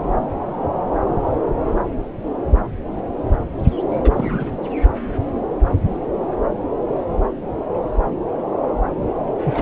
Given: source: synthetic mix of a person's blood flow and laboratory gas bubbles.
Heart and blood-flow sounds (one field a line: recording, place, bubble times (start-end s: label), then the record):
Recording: Doppler ultrasound of blood flow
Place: subclavian vein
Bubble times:
3.91-4.51 s: bubbles
9.44-9.62 s: bubbles
From the record:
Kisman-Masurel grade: 211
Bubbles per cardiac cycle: several, 3 to 8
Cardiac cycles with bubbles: 1 to 10%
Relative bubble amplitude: barely perceptible (0.100 to 0.250)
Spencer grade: 1 (occasional bubble signal discernible with the cardiac motion signal, with majority of cardiac periods free of bubbles)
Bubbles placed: anywhere in the cardiac cycle